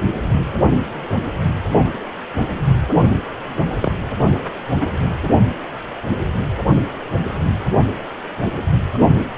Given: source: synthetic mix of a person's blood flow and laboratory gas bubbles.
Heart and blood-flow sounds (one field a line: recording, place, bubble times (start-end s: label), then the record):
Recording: Doppler ultrasound of blood flow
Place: precordium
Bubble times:
3.81-3.92 s: bubbles
4.79-4.97 s: bubbles
From the record:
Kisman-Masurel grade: 122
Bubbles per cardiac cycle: 1 to 2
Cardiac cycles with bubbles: 10 to 50%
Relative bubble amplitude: moderate (0.250 to 0.450)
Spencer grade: 2 (many but less than half of the cardiac periods contain bubble signals, singularly or in groups)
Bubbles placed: only in the low amplitude regions of the cardiac cycle